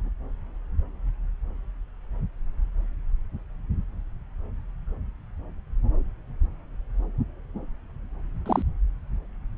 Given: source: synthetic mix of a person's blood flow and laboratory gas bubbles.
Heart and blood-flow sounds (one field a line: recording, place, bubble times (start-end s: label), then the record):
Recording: Doppler ultrasound of blood flow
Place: subclavian vein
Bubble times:
8.46-8.62 s: bubbles
From the record:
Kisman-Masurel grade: 112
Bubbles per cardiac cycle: 1 to 2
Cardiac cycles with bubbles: 1 to 10%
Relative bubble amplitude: moderate (0.250 to 0.450)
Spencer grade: 1 (occasional bubble signal discernible with the cardiac motion signal, with majority of cardiac periods free of bubbles)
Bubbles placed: anywhere in the cardiac cycle